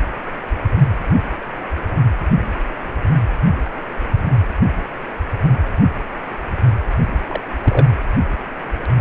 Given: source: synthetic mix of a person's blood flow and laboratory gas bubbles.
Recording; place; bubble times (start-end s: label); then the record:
Doppler ultrasound of blood flow; precordium
7.27-7.41 s: bubbles
7.64-7.88 s: bubbles
From the record:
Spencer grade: 2 (many but less than half of the cardiac periods contain bubble signals, singularly or in groups); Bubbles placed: anywhere in the cardiac cycle